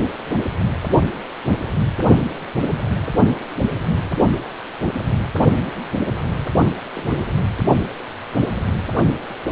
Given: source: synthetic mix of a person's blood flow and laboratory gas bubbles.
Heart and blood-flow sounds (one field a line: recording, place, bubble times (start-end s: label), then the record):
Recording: Doppler ultrasound of blood flow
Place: precordium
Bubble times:
6.96-7.25 s: bubbles
From the record:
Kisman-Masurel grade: 111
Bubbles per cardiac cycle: 1 to 2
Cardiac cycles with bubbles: 1 to 10%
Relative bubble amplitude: barely perceptible (0.100 to 0.250)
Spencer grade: 1 (occasional bubble signal discernible with the cardiac motion signal, with majority of cardiac periods free of bubbles)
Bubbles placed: only in the low amplitude regions of the cardiac cycle